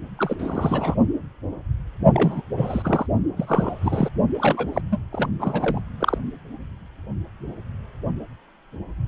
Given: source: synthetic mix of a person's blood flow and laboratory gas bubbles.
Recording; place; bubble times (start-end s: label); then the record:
Doppler ultrasound of blood flow; precordium
0.19-0.36 s: bubbles
0.39-0.95 s: bubbles
2.14-2.42 s: bubbles
2.57-3.06 s: bubbles
3.37-4.09 s: bubbles
4.34-4.81 s: bubbles
4.90-5.01 s: bubbles
5.12-5.27 s: bubbles
5.39-5.79 s: bubbles
6.00-6.18 s: bubbles
From the record:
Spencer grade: 3 (all of the cardiac periods contain showers or single bubble signals, but not dominating or overriding the cardiac motion signals); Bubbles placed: only in the low amplitude regions of the cardiac cycle